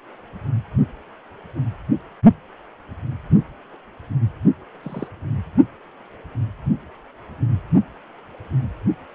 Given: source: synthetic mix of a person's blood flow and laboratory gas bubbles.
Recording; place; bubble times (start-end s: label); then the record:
Doppler ultrasound of blood flow; precordium
4.83-5.08 s: bubbles
From the record:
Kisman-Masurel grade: 121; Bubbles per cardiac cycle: 1 to 2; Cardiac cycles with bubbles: 10 to 50%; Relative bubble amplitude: barely perceptible (0.100 to 0.250); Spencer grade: 2 (many but less than half of the cardiac periods contain bubble signals, singularly or in groups); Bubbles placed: only in the low amplitude regions of the cardiac cycle